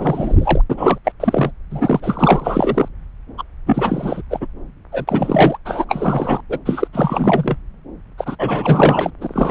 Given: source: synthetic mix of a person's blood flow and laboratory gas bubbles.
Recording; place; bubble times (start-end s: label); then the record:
Doppler ultrasound of blood flow; subclavian vein
0.00-0.61 s: bubbles
0.70-0.99 s: bubbles
1.04-1.12 s: bubbles
1.20-1.51 s: bubbles
1.70-2.88 s: bubbles
3.38-3.43 s: bubbles
3.66-4.22 s: bubbles
4.30-4.47 s: bubbles
4.92-5.05 s: bubbles
5.08-5.58 s: bubbles
5.65-5.84 s: bubbles
5.88-6.40 s: bubbles
6.49-6.58 s: bubbles
6.65-6.88 s: bubbles
6.93-7.57 s: bubbles
8.17-8.36 s: bubbles
8.38-9.11 s: bubbles
9.21-9.51 s: bubbles
From the record:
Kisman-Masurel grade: 444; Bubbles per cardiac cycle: continuous sound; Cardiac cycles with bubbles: 100%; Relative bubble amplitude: maximal (0.775 to 0.999); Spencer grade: 4 (maximum detectable bubble signal sounding continuously throughout systole and diastole of every cardiac period, and overriding the amplitude of the normal cardiac signals); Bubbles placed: anywhere in the cardiac cycle